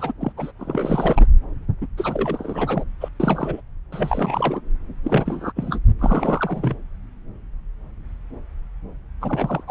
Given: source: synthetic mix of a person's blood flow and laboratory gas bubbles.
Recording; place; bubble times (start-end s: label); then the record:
Doppler ultrasound of blood flow; subclavian vein
0.00-0.12 s: bubbles
0.21-0.32 s: bubbles
0.37-0.52 s: bubbles
0.58-1.26 s: bubbles
1.81-1.87 s: bubbles
1.98-2.85 s: bubbles
3.00-3.09 s: bubbles
3.19-3.61 s: bubbles
3.92-4.61 s: bubbles
5.04-5.52 s: bubbles
5.56-5.80 s: bubbles
5.99-6.76 s: bubbles
9.21-9.63 s: bubbles
9.68-9.71 s: bubbles
From the record:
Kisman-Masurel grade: 332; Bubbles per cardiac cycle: rolling drumbeat, 9 or more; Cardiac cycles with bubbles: 50 to 99%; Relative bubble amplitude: moderate (0.250 to 0.450); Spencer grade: 3 (all of the cardiac periods contain showers or single bubble signals, but not dominating or overriding the cardiac motion signals); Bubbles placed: anywhere in the cardiac cycle